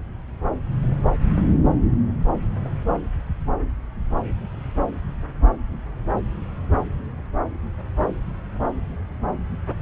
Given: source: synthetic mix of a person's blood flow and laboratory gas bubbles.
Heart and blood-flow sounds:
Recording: Doppler ultrasound of blood flow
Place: subclavian vein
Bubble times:
no bubbles
From the record:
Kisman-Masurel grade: 000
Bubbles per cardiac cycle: 0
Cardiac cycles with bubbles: 0%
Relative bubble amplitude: no bubbles discernible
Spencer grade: 0 (complete lack of bubble signals)

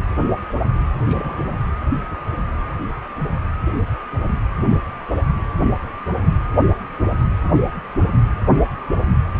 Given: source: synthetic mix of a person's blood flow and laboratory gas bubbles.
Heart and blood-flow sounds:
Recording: Doppler ultrasound of blood flow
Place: precordium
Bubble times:
1.06-1.58 s: bubbles
From the record:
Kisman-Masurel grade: 211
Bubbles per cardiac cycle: several, 3 to 8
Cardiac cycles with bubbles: 1 to 10%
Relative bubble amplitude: barely perceptible (0.100 to 0.250)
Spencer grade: 1 (occasional bubble signal discernible with the cardiac motion signal, with majority of cardiac periods free of bubbles)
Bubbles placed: anywhere in the cardiac cycle

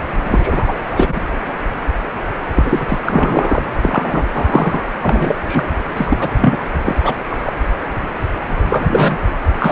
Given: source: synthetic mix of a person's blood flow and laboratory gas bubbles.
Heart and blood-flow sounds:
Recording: Doppler ultrasound of blood flow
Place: precordium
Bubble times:
0.24-0.79 s: bubbles
0.91-1.21 s: bubbles
2.55-2.99 s: bubbles
3.06-3.62 s: bubbles
3.81-4.24 s: bubbles
4.32-4.85 s: bubbles
5.02-5.37 s: bubbles
5.43-5.66 s: bubbles
5.96-6.58 s: bubbles
6.83-6.96 s: bubbles
7.04-7.15 s: bubbles
7.30-7.52 s: bubbles
8.68-9.18 s: bubbles
9.58-9.72 s: bubbles
From the record:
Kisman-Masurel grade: 233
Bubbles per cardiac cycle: several, 3 to 8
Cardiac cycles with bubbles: 50 to 99%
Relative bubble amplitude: loud (0.450 to 0.775)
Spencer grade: 3 (all of the cardiac periods contain showers or single bubble signals, but not dominating or overriding the cardiac motion signals)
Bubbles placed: anywhere in the cardiac cycle

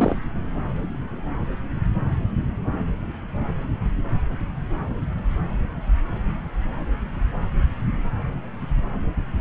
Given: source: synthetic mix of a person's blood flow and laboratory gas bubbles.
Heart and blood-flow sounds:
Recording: Doppler ultrasound of blood flow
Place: subclavian vein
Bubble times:
0.00-0.15 s: bubbles
From the record:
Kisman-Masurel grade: 213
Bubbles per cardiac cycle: several, 3 to 8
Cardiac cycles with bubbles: 1 to 10%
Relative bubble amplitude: loud (0.450 to 0.775)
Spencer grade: 1 (occasional bubble signal discernible with the cardiac motion signal, with majority of cardiac periods free of bubbles)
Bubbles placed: anywhere in the cardiac cycle

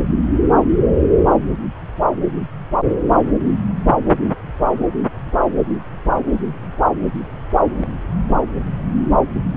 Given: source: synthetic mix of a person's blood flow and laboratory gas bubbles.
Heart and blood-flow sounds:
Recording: Doppler ultrasound of blood flow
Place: subclavian vein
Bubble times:
7.80-7.90 s: bubbles
From the record:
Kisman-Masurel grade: 111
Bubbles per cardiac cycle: 1 to 2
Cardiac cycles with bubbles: 1 to 10%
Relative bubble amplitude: barely perceptible (0.100 to 0.250)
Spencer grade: 1 (occasional bubble signal discernible with the cardiac motion signal, with majority of cardiac periods free of bubbles)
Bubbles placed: anywhere in the cardiac cycle

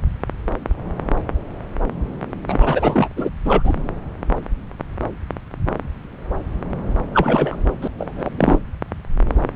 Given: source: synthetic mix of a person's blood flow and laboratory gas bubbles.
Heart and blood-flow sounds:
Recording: Doppler ultrasound of blood flow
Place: subclavian vein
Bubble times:
2.47-3.08 s: bubbles
3.16-3.29 s: bubbles
3.44-3.73 s: bubbles
7.14-7.57 s: bubbles
7.82-7.88 s: bubbles
7.98-8.29 s: bubbles
8.37-8.59 s: bubbles
From the record:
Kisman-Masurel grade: 223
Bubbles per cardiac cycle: several, 3 to 8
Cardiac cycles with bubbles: 10 to 50%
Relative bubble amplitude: loud (0.450 to 0.775)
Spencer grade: 2 (many but less than half of the cardiac periods contain bubble signals, singularly or in groups)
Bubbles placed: anywhere in the cardiac cycle

